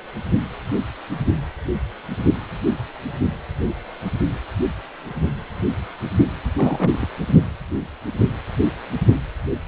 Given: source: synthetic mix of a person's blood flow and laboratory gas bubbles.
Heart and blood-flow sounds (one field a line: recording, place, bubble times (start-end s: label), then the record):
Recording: Doppler ultrasound of blood flow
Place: precordium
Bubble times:
6.55-7.07 s: bubbles
From the record:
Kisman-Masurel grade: 212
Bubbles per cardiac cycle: several, 3 to 8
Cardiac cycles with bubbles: 1 to 10%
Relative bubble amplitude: moderate (0.250 to 0.450)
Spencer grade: 1 (occasional bubble signal discernible with the cardiac motion signal, with majority of cardiac periods free of bubbles)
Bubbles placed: anywhere in the cardiac cycle